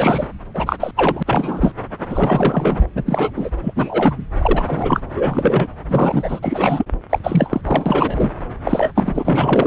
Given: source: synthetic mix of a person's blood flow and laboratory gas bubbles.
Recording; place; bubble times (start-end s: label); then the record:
Doppler ultrasound of blood flow; subclavian vein
0.00-0.27 s: bubbles
0.54-0.76 s: bubbles
0.79-0.91 s: bubbles
0.96-1.23 s: bubbles
1.26-1.73 s: bubbles
2.09-2.87 s: bubbles
2.95-3.50 s: bubbles
3.61-4.18 s: bubbles
4.38-4.64 s: bubbles
4.67-5.00 s: bubbles
5.16-5.67 s: bubbles
5.88-6.40 s: bubbles
6.43-6.86 s: bubbles
7.10-7.19 s: bubbles
7.23-7.61 s: bubbles
7.65-8.31 s: bubbles
8.64-8.91 s: bubbles
8.95-9.67 s: bubbles
From the record:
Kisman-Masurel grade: 343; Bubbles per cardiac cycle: rolling drumbeat, 9 or more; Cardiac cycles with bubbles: 100%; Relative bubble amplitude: loud (0.450 to 0.775); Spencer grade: 3 (all of the cardiac periods contain showers or single bubble signals, but not dominating or overriding the cardiac motion signals); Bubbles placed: anywhere in the cardiac cycle